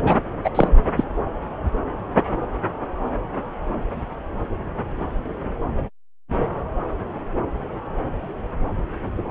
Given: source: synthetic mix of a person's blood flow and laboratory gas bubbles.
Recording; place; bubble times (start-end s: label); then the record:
Doppler ultrasound of blood flow; subclavian vein
0.04-0.17 s: bubbles
0.44-0.49 s: bubbles
0.55-0.68 s: bubbles
0.96-1.04 s: bubbles
From the record:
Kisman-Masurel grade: 213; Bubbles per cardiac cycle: several, 3 to 8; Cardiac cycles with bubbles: 1 to 10%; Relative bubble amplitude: loud (0.450 to 0.775); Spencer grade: 1 (occasional bubble signal discernible with the cardiac motion signal, with majority of cardiac periods free of bubbles); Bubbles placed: anywhere in the cardiac cycle